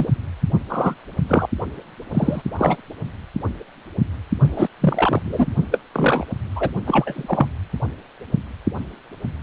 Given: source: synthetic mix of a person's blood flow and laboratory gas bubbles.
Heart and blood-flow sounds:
Doppler ultrasound of blood flow; precordium
0.00-0.09 s: bubbles
0.69-0.94 s: bubbles
1.28-1.46 s: bubbles
2.13-2.42 s: bubbles
2.57-2.77 s: bubbles
4.41-4.68 s: bubbles
4.80-5.47 s: bubbles
5.71-5.78 s: bubbles
5.94-6.26 s: bubbles
6.56-6.70 s: bubbles
6.86-7.49 s: bubbles
From the record:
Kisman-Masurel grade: 233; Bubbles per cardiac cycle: several, 3 to 8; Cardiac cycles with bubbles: 50 to 99%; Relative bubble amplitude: loud (0.450 to 0.775); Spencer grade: 3 (all of the cardiac periods contain showers or single bubble signals, but not dominating or overriding the cardiac motion signals); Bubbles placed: anywhere in the cardiac cycle

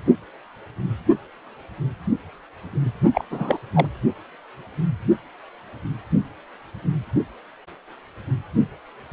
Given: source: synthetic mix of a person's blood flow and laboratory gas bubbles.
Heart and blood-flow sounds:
Doppler ultrasound of blood flow; precordium
3.14-3.25 s: bubbles
3.30-3.59 s: bubbles
3.74-3.87 s: bubbles
From the record:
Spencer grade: 1 (occasional bubble signal discernible with the cardiac motion signal, with majority of cardiac periods free of bubbles); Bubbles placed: only in the low amplitude regions of the cardiac cycle

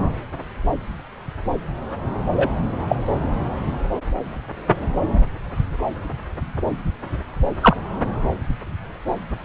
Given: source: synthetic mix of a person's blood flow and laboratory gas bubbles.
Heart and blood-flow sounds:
Doppler ultrasound of blood flow; subclavian vein
2.35-2.49 s: bubbles
2.88-2.96 s: bubbles
7.61-7.76 s: bubbles
From the record:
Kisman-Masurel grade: 123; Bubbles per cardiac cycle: 1 to 2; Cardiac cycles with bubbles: 10 to 50%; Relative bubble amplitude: loud (0.450 to 0.775); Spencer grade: 2 (many but less than half of the cardiac periods contain bubble signals, singularly or in groups); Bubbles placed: anywhere in the cardiac cycle

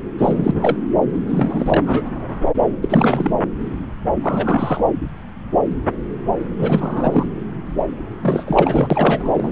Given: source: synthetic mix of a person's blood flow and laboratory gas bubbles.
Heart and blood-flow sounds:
Doppler ultrasound of blood flow; subclavian vein
0.18-0.54 s: bubbles
0.60-0.76 s: bubbles
1.26-1.83 s: bubbles
1.86-2.04 s: bubbles
2.82-3.31 s: bubbles
4.22-4.82 s: bubbles
6.58-7.26 s: bubbles
8.22-8.88 s: bubbles
8.90-9.51 s: bubbles
From the record:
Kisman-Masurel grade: 332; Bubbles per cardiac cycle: rolling drumbeat, 9 or more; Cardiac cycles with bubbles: 50 to 99%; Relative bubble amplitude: moderate (0.250 to 0.450); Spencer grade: 3 (all of the cardiac periods contain showers or single bubble signals, but not dominating or overriding the cardiac motion signals); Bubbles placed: anywhere in the cardiac cycle

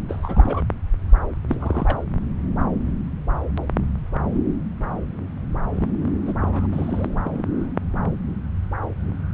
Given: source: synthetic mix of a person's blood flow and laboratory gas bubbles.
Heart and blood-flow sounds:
Doppler ultrasound of blood flow; subclavian vein
0.09-0.62 s: bubbles
1.48-2.00 s: bubbles
5.76-5.88 s: bubbles
6.22-6.33 s: bubbles
6.41-6.67 s: bubbles
6.72-7.21 s: bubbles
7.24-7.46 s: bubbles
From the record:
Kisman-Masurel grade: 221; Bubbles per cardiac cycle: several, 3 to 8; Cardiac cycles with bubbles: 10 to 50%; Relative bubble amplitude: barely perceptible (0.100 to 0.250); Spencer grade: 2 (many but less than half of the cardiac periods contain bubble signals, singularly or in groups); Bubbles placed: anywhere in the cardiac cycle

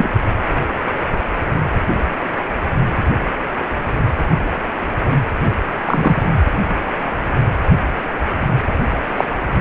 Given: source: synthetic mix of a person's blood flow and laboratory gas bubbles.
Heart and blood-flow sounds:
Doppler ultrasound of blood flow; precordium
0.00-0.08 s: bubbles
5.87-6.23 s: bubbles
9.16-9.24 s: bubbles
From the record:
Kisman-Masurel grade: 123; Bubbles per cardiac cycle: 1 to 2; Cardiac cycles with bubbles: 10 to 50%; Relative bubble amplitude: loud (0.450 to 0.775); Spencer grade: 2 (many but less than half of the cardiac periods contain bubble signals, singularly or in groups); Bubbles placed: anywhere in the cardiac cycle

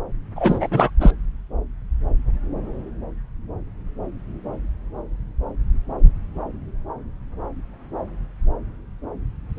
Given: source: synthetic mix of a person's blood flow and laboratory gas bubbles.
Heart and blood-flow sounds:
Doppler ultrasound of blood flow; subclavian vein
0.36-0.67 s: bubbles
0.71-0.90 s: bubbles
1.00-1.11 s: bubbles
From the record:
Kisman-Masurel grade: 213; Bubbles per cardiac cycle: several, 3 to 8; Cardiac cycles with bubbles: 1 to 10%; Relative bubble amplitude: loud (0.450 to 0.775); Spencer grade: 1 (occasional bubble signal discernible with the cardiac motion signal, with majority of cardiac periods free of bubbles); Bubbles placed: anywhere in the cardiac cycle

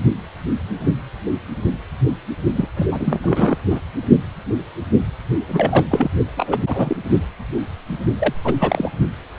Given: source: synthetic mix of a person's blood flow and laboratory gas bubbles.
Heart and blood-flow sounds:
Doppler ultrasound of blood flow; precordium
2.55-2.69 s: bubbles
2.76-2.88 s: bubbles
2.91-3.19 s: bubbles
3.22-3.56 s: bubbles
3.71-3.80 s: bubbles
5.48-5.86 s: bubbles
5.88-6.11 s: bubbles
6.37-6.96 s: bubbles
8.18-8.33 s: bubbles
8.44-8.53 s: bubbles
8.59-8.90 s: bubbles
From the record:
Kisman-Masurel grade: 332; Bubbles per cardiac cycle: rolling drumbeat, 9 or more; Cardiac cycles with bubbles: 50 to 99%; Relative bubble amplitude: moderate (0.250 to 0.450); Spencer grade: 3 (all of the cardiac periods contain showers or single bubble signals, but not dominating or overriding the cardiac motion signals); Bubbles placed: only in the low amplitude regions of the cardiac cycle

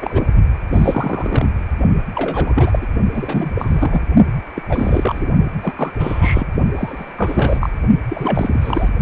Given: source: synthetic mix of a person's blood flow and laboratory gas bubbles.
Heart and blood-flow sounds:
Doppler ultrasound of blood flow; precordium
0.01-0.22 s: bubbles
0.33-0.44 s: bubbles
0.73-1.49 s: bubbles
2.14-2.87 s: bubbles
3.13-3.51 s: bubbles
3.54-4.01 s: bubbles
4.55-4.62 s: bubbles
4.69-5.27 s: bubbles
5.62-5.73 s: bubbles
5.75-5.90 s: bubbles
5.98-6.47 s: bubbles
6.74-7.12 s: bubbles
7.17-7.70 s: bubbles
8.09-8.89 s: bubbles
From the record:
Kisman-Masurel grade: 333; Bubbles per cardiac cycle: rolling drumbeat, 9 or more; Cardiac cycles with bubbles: 50 to 99%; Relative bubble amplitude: loud (0.450 to 0.775); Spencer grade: 3 (all of the cardiac periods contain showers or single bubble signals, but not dominating or overriding the cardiac motion signals); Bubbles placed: only in the low amplitude regions of the cardiac cycle

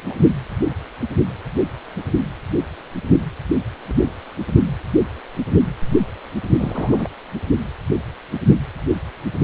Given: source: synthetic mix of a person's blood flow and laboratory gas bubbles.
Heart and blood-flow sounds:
Doppler ultrasound of blood flow; precordium
0.10-0.15 s: bubbles
6.58-7.08 s: bubbles
From the record:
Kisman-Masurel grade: 222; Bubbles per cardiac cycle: several, 3 to 8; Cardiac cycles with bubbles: 10 to 50%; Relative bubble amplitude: moderate (0.250 to 0.450); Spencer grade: 2 (many but less than half of the cardiac periods contain bubble signals, singularly or in groups); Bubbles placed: only in the low amplitude regions of the cardiac cycle

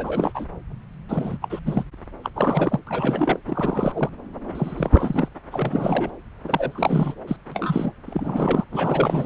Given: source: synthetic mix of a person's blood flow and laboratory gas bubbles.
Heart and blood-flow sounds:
Doppler ultrasound of blood flow; subclavian vein
0.00-0.45 s: bubbles
1.08-1.37 s: bubbles
1.42-1.60 s: bubbles
1.66-1.83 s: bubbles
2.23-2.30 s: bubbles
2.35-2.79 s: bubbles
2.87-3.39 s: bubbles
3.47-4.09 s: bubbles
4.54-5.29 s: bubbles
5.51-6.11 s: bubbles
6.44-7.14 s: bubbles
7.27-7.37 s: bubbles
7.51-7.92 s: bubbles
8.06-8.64 s: bubbles
8.71-9.26 s: bubbles
From the record:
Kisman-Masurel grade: 342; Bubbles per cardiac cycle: rolling drumbeat, 9 or more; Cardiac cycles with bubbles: 100%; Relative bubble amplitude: moderate (0.250 to 0.450); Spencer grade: 3 (all of the cardiac periods contain showers or single bubble signals, but not dominating or overriding the cardiac motion signals); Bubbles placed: anywhere in the cardiac cycle

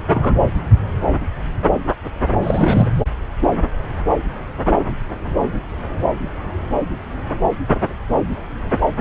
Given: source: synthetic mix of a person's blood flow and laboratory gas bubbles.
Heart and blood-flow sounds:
Doppler ultrasound of blood flow; subclavian vein
0.13-0.41 s: bubbles
2.43-2.89 s: bubbles
From the record:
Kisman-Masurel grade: 223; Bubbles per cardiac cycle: several, 3 to 8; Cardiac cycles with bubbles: 10 to 50%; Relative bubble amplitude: loud (0.450 to 0.775); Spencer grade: 2 (many but less than half of the cardiac periods contain bubble signals, singularly or in groups); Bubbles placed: anywhere in the cardiac cycle

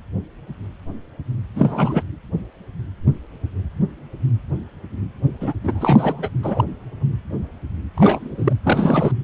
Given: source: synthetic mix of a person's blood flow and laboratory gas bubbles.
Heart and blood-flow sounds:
Doppler ultrasound of blood flow; precordium
1.55-2.03 s: bubbles
5.41-5.53 s: bubbles
5.63-6.29 s: bubbles
6.43-6.64 s: bubbles
7.96-8.53 s: bubbles
8.63-9.12 s: bubbles
From the record:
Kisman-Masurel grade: 222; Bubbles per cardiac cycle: several, 3 to 8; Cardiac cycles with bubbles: 10 to 50%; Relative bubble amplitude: moderate (0.250 to 0.450); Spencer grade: 2 (many but less than half of the cardiac periods contain bubble signals, singularly or in groups); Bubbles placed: anywhere in the cardiac cycle

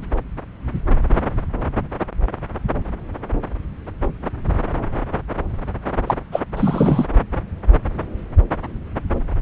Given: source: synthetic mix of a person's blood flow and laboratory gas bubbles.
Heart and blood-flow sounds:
Doppler ultrasound of blood flow; subclavian vein
6.06-6.15 s: bubbles
6.32-6.40 s: bubbles
6.57-7.06 s: bubbles
From the record:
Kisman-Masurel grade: 113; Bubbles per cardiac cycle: 1 to 2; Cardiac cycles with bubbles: 1 to 10%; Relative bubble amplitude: loud (0.450 to 0.775); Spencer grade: 1 (occasional bubble signal discernible with the cardiac motion signal, with majority of cardiac periods free of bubbles); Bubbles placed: anywhere in the cardiac cycle

